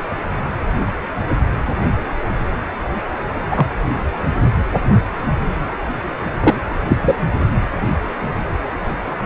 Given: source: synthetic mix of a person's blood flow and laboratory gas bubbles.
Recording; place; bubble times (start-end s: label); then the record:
Doppler ultrasound of blood flow; precordium
3.50-3.67 s: bubbles
6.41-6.56 s: bubbles
6.89-6.98 s: bubbles
7.01-7.15 s: bubbles
From the record:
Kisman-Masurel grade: 123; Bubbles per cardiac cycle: 1 to 2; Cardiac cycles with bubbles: 10 to 50%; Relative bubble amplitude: loud (0.450 to 0.775); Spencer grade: 2 (many but less than half of the cardiac periods contain bubble signals, singularly or in groups); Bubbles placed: anywhere in the cardiac cycle